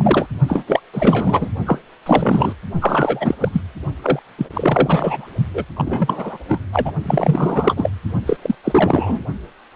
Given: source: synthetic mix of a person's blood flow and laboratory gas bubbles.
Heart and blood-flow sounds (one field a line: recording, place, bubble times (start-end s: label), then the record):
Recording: Doppler ultrasound of blood flow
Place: precordium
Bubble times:
0.00-0.27 s: bubbles
0.47-0.64 s: bubbles
0.67-0.80 s: bubbles
0.94-1.49 s: bubbles
1.66-1.78 s: bubbles
2.06-2.52 s: bubbles
2.81-3.34 s: bubbles
3.40-3.48 s: bubbles
3.52-3.61 s: bubbles
4.02-4.19 s: bubbles
4.38-5.27 s: bubbles
5.54-5.65 s: bubbles
5.76-6.38 s: bubbles
6.48-6.59 s: bubbles
6.73-6.92 s: bubbles
7.06-7.91 s: bubbles
8.26-8.37 s: bubbles
8.41-8.55 s: bubbles
8.64-9.20 s: bubbles
From the record:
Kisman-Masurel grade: 343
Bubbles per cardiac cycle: rolling drumbeat, 9 or more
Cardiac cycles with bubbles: 100%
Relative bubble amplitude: loud (0.450 to 0.775)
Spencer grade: 3 (all of the cardiac periods contain showers or single bubble signals, but not dominating or overriding the cardiac motion signals)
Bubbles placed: only in the low amplitude regions of the cardiac cycle